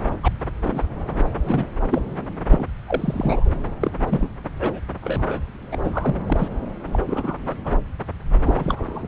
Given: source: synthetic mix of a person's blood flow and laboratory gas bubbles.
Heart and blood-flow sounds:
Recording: Doppler ultrasound of blood flow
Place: subclavian vein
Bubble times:
0.23-0.28 s: bubbles
0.63-0.83 s: bubbles
1.45-1.67 s: bubbles
1.91-2.02 s: bubbles
2.49-2.65 s: bubbles
2.87-3.52 s: bubbles
3.67-3.91 s: bubbles
4.09-4.29 s: bubbles
4.59-4.80 s: bubbles
5.01-5.40 s: bubbles
5.71-6.15 s: bubbles
6.26-6.48 s: bubbles
6.92-6.99 s: bubbles
7.06-7.38 s: bubbles
7.45-7.54 s: bubbles
7.64-7.76 s: bubbles
8.41-9.04 s: bubbles
From the record:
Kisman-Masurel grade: 242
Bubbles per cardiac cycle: several, 3 to 8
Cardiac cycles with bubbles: 100%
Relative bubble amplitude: moderate (0.250 to 0.450)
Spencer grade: 3 (all of the cardiac periods contain showers or single bubble signals, but not dominating or overriding the cardiac motion signals)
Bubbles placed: anywhere in the cardiac cycle

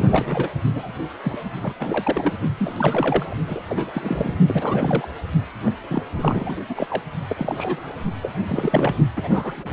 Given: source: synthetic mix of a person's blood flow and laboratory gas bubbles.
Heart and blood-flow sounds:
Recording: Doppler ultrasound of blood flow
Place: precordium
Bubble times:
0.00-0.49 s: bubbles
0.74-0.93 s: bubbles
1.24-1.39 s: bubbles
1.62-1.74 s: bubbles
1.80-2.31 s: bubbles
2.58-3.34 s: bubbles
3.47-3.61 s: bubbles
3.69-3.91 s: bubbles
3.93-4.33 s: bubbles
4.46-5.09 s: bubbles
5.66-5.72 s: bubbles
5.90-6.02 s: bubbles
6.18-6.56 s: bubbles
6.69-6.87 s: bubbles
6.90-7.02 s: bubbles
7.29-7.92 s: bubbles
8.22-8.32 s: bubbles
8.48-8.95 s: bubbles
9.16-9.28 s: bubbles
9.31-9.53 s: bubbles
9.57-9.73 s: bubbles
From the record:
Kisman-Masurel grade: 342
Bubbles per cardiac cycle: rolling drumbeat, 9 or more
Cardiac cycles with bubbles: 100%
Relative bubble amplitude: moderate (0.250 to 0.450)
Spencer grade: 3 (all of the cardiac periods contain showers or single bubble signals, but not dominating or overriding the cardiac motion signals)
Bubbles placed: only in the low amplitude regions of the cardiac cycle

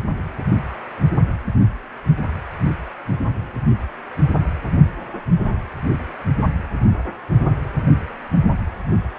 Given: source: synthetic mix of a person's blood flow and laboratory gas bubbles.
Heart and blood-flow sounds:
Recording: Doppler ultrasound of blood flow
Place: precordium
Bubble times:
no bubbles
From the record:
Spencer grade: 0 (complete lack of bubble signals)

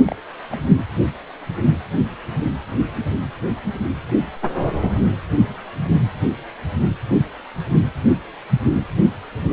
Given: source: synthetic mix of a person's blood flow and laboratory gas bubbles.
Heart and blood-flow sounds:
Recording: Doppler ultrasound of blood flow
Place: precordium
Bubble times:
0.06-0.15 s: bubbles
0.51-0.66 s: bubbles
From the record:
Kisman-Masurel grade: 111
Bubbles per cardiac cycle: 1 to 2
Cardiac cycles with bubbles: 1 to 10%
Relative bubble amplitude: barely perceptible (0.100 to 0.250)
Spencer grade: 1 (occasional bubble signal discernible with the cardiac motion signal, with majority of cardiac periods free of bubbles)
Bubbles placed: anywhere in the cardiac cycle

